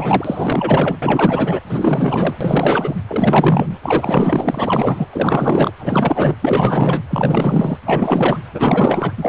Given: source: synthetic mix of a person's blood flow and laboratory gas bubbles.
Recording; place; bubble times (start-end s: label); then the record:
Doppler ultrasound of blood flow; precordium
0.00-0.97 s: bubbles
1.02-1.60 s: bubbles
1.69-2.38 s: bubbles
2.40-2.96 s: bubbles
3.07-3.78 s: bubbles
3.82-5.08 s: bubbles
5.12-5.71 s: bubbles
5.79-6.35 s: bubbles
6.42-7.02 s: bubbles
7.10-7.78 s: bubbles
7.85-8.38 s: bubbles
8.53-9.13 s: bubbles
9.18-9.29 s: bubbles
From the record:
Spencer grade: 4 (maximum detectable bubble signal sounding continuously throughout systole and diastole of every cardiac period, and overriding the amplitude of the normal cardiac signals); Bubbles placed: anywhere in the cardiac cycle